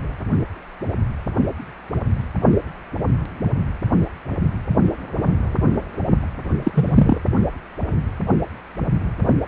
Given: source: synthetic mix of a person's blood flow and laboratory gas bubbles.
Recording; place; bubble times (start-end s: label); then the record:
Doppler ultrasound of blood flow; precordium
6.64-7.17 s: bubbles
From the record:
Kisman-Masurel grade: 113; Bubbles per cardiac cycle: 1 to 2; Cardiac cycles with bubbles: 1 to 10%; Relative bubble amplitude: loud (0.450 to 0.775); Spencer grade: 1 (occasional bubble signal discernible with the cardiac motion signal, with majority of cardiac periods free of bubbles); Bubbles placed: anywhere in the cardiac cycle